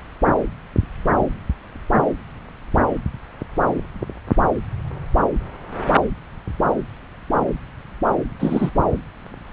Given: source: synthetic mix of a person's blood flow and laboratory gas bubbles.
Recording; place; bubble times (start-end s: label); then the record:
Doppler ultrasound of blood flow; subclavian vein
8.39-8.71 s: bubbles
From the record:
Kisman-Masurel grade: 113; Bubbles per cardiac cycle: 1 to 2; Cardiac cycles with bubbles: 1 to 10%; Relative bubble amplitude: loud (0.450 to 0.775); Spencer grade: 1 (occasional bubble signal discernible with the cardiac motion signal, with majority of cardiac periods free of bubbles); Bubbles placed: anywhere in the cardiac cycle